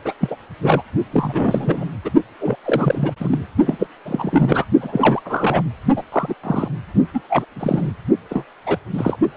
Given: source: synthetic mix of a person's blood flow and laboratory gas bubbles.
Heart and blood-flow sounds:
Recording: Doppler ultrasound of blood flow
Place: precordium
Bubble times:
0.04-0.14 s: bubbles
0.21-0.36 s: bubbles
0.62-0.82 s: bubbles
1.12-1.84 s: bubbles
2.04-2.10 s: bubbles
2.40-2.56 s: bubbles
2.65-3.13 s: bubbles
3.20-3.47 s: bubbles
3.65-3.87 s: bubbles
4.05-4.64 s: bubbles
4.80-5.21 s: bubbles
5.25-5.63 s: bubbles
5.96-6.02 s: bubbles
6.12-6.34 s: bubbles
6.43-6.68 s: bubbles
7.13-7.21 s: bubbles
7.29-7.45 s: bubbles
7.55-7.92 s: bubbles
8.29-8.45 s: bubbles
8.66-8.77 s: bubbles
8.93-9.17 s: bubbles
9.35-9.37 s: bubbles
From the record:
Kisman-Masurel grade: 342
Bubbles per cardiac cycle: rolling drumbeat, 9 or more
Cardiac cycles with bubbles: 100%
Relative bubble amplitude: moderate (0.250 to 0.450)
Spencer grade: 3 (all of the cardiac periods contain showers or single bubble signals, but not dominating or overriding the cardiac motion signals)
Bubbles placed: only in the low amplitude regions of the cardiac cycle

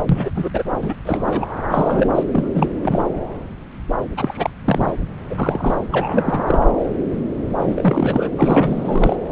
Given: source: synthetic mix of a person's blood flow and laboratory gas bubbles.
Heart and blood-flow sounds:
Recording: Doppler ultrasound of blood flow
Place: subclavian vein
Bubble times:
0.00-0.03 s: bubbles
0.09-0.31 s: bubbles
0.35-0.50 s: bubbles
0.53-0.62 s: bubbles
0.82-0.96 s: bubbles
1.07-1.47 s: bubbles
1.71-2.09 s: bubbles
2.15-2.23 s: bubbles
2.32-2.68 s: bubbles
2.82-3.05 s: bubbles
4.17-4.50 s: bubbles
4.64-4.93 s: bubbles
5.30-5.81 s: bubbles
5.92-6.42 s: bubbles
6.46-6.58 s: bubbles
7.59-8.29 s: bubbles
8.37-9.16 s: bubbles
From the record:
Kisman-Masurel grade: 232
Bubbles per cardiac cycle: several, 3 to 8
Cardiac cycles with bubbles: 50 to 99%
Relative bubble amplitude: moderate (0.250 to 0.450)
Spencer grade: 3 (all of the cardiac periods contain showers or single bubble signals, but not dominating or overriding the cardiac motion signals)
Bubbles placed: anywhere in the cardiac cycle

